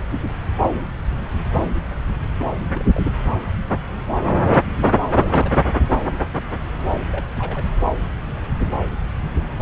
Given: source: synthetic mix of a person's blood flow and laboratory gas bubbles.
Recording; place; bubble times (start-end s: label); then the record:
Doppler ultrasound of blood flow; subclavian vein
2.39-2.58 s: bubbles
2.74-2.85 s: bubbles
2.95-3.07 s: bubbles
5.00-5.58 s: bubbles
6.92-6.96 s: bubbles
7.11-7.25 s: bubbles
7.33-7.65 s: bubbles
From the record:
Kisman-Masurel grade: 221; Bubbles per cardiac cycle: several, 3 to 8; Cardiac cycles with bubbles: 10 to 50%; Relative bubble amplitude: barely perceptible (0.100 to 0.250); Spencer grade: 2 (many but less than half of the cardiac periods contain bubble signals, singularly or in groups); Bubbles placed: anywhere in the cardiac cycle